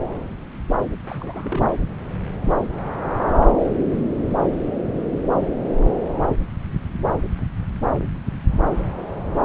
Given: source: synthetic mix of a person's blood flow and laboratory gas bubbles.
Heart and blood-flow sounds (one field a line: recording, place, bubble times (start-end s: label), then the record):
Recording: Doppler ultrasound of blood flow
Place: subclavian vein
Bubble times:
1.06-1.72 s: bubbles
From the record:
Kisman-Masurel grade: 211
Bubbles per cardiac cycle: several, 3 to 8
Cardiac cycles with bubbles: 1 to 10%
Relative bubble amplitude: barely perceptible (0.100 to 0.250)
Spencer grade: 1 (occasional bubble signal discernible with the cardiac motion signal, with majority of cardiac periods free of bubbles)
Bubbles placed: anywhere in the cardiac cycle